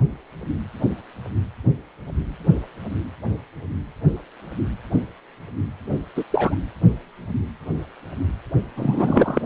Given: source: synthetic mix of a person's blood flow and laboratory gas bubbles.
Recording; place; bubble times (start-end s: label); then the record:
Doppler ultrasound of blood flow; precordium
6.16-6.24 s: bubbles
6.30-6.55 s: bubbles
8.76-9.42 s: bubbles
From the record:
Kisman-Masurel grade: 223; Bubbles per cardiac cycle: several, 3 to 8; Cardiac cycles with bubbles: 10 to 50%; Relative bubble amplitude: loud (0.450 to 0.775); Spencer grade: 2 (many but less than half of the cardiac periods contain bubble signals, singularly or in groups); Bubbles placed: only in the low amplitude regions of the cardiac cycle